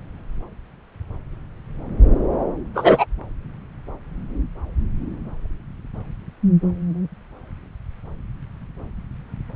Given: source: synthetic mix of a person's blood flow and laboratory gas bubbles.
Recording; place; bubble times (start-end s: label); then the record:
Doppler ultrasound of blood flow; subclavian vein
2.74-3.06 s: bubbles
From the record:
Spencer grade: 2 (many but less than half of the cardiac periods contain bubble signals, singularly or in groups); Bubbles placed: anywhere in the cardiac cycle